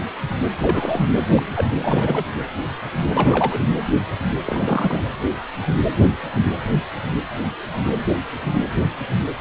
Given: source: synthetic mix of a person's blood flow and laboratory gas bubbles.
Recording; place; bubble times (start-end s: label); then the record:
Doppler ultrasound of blood flow; precordium
0.52-1.05 s: bubbles
1.32-1.42 s: bubbles
1.55-1.68 s: bubbles
1.80-2.32 s: bubbles
3.13-3.60 s: bubbles
4.45-5.02 s: bubbles
From the record:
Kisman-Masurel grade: 222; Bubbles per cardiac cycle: several, 3 to 8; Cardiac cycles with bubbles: 10 to 50%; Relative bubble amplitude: moderate (0.250 to 0.450); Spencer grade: 2 (many but less than half of the cardiac periods contain bubble signals, singularly or in groups); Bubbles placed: anywhere in the cardiac cycle